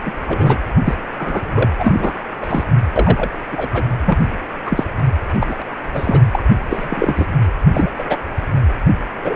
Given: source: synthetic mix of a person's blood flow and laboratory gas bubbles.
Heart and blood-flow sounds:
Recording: Doppler ultrasound of blood flow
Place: precordium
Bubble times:
0.05-0.12 s: bubbles
0.27-0.56 s: bubbles
0.84-0.94 s: bubbles
1.18-1.70 s: bubbles
1.79-2.12 s: bubbles
2.42-2.63 s: bubbles
2.96-3.30 s: bubbles
3.51-3.91 s: bubbles
4.05-4.25 s: bubbles
4.66-4.84 s: bubbles
5.41-5.54 s: bubbles
5.93-6.20 s: bubbles
6.33-6.43 s: bubbles
6.70-7.26 s: bubbles
7.73-7.89 s: bubbles
7.98-8.04 s: bubbles
8.10-8.18 s: bubbles
9.24-9.36 s: bubbles
From the record:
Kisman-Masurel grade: 243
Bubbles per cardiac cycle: several, 3 to 8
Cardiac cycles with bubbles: 100%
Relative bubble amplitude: loud (0.450 to 0.775)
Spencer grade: 3 (all of the cardiac periods contain showers or single bubble signals, but not dominating or overriding the cardiac motion signals)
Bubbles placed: anywhere in the cardiac cycle

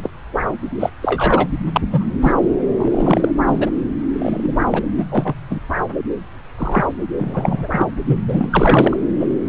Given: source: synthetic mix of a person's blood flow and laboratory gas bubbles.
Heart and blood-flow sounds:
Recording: Doppler ultrasound of blood flow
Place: subclavian vein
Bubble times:
0.02-0.10 s: bubbles
0.79-0.90 s: bubbles
1.02-1.48 s: bubbles
1.73-1.81 s: bubbles
1.92-2.03 s: bubbles
2.22-2.32 s: bubbles
2.78-3.33 s: bubbles
3.46-3.70 s: bubbles
4.12-4.60 s: bubbles
4.70-4.83 s: bubbles
4.98-5.05 s: bubbles
5.11-5.33 s: bubbles
5.50-5.60 s: bubbles
6.58-6.87 s: bubbles
7.18-7.68 s: bubbles
7.71-7.87 s: bubbles
8.06-8.97 s: bubbles
9.20-9.28 s: bubbles
9.47-9.49 s: bubbles
From the record:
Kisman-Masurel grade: 243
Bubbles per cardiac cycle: several, 3 to 8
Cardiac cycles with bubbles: 100%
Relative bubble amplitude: loud (0.450 to 0.775)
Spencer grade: 3 (all of the cardiac periods contain showers or single bubble signals, but not dominating or overriding the cardiac motion signals)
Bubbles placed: anywhere in the cardiac cycle

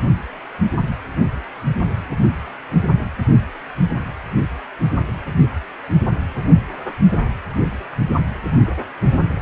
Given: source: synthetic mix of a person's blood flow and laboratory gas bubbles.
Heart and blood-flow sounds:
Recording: Doppler ultrasound of blood flow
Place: precordium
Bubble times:
no bubbles
From the record:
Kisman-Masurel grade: 000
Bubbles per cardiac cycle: 0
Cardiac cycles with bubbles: 0%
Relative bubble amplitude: no bubbles discernible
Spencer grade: 0 (complete lack of bubble signals)

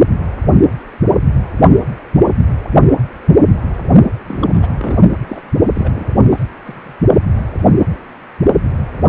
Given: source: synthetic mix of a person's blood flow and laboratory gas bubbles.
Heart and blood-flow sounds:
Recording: Doppler ultrasound of blood flow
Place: precordium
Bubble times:
4.28-4.99 s: bubbles
5.26-5.46 s: bubbles
5.75-6.14 s: bubbles
6.30-6.45 s: bubbles
6.65-6.96 s: bubbles
From the record:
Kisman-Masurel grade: 221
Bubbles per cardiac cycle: several, 3 to 8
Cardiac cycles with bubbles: 10 to 50%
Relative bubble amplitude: barely perceptible (0.100 to 0.250)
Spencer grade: 2 (many but less than half of the cardiac periods contain bubble signals, singularly or in groups)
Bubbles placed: only in the low amplitude regions of the cardiac cycle

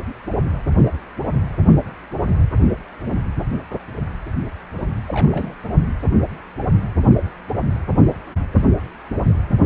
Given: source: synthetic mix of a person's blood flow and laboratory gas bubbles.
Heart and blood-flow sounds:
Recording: Doppler ultrasound of blood flow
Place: precordium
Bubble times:
5.08-5.55 s: bubbles
From the record:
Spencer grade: 1 (occasional bubble signal discernible with the cardiac motion signal, with majority of cardiac periods free of bubbles)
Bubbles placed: only in the low amplitude regions of the cardiac cycle

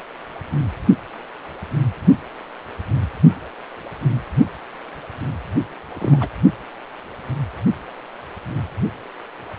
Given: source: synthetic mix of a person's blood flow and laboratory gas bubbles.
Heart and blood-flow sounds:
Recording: Doppler ultrasound of blood flow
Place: precordium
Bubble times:
5.95-6.28 s: bubbles
From the record:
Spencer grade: 2 (many but less than half of the cardiac periods contain bubble signals, singularly or in groups)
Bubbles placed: only in the low amplitude regions of the cardiac cycle

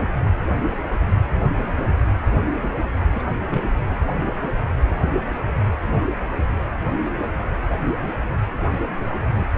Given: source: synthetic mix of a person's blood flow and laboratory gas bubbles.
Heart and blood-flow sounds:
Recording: Doppler ultrasound of blood flow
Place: precordium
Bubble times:
3.14-3.23 s: bubbles
3.49-3.67 s: bubbles
3.88-4.00 s: bubbles
From the record:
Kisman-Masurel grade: 211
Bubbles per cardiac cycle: several, 3 to 8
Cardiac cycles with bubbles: 1 to 10%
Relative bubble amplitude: barely perceptible (0.100 to 0.250)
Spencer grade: 1 (occasional bubble signal discernible with the cardiac motion signal, with majority of cardiac periods free of bubbles)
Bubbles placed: anywhere in the cardiac cycle

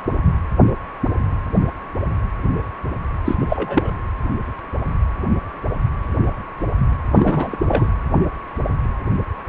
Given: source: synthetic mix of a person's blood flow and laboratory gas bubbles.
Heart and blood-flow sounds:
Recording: Doppler ultrasound of blood flow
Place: precordium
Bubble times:
3.25-3.92 s: bubbles
7.12-7.57 s: bubbles
7.67-7.87 s: bubbles
From the record:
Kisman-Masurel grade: 223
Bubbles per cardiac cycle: several, 3 to 8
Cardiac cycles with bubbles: 10 to 50%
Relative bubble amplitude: loud (0.450 to 0.775)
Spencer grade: 2 (many but less than half of the cardiac periods contain bubble signals, singularly or in groups)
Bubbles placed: anywhere in the cardiac cycle

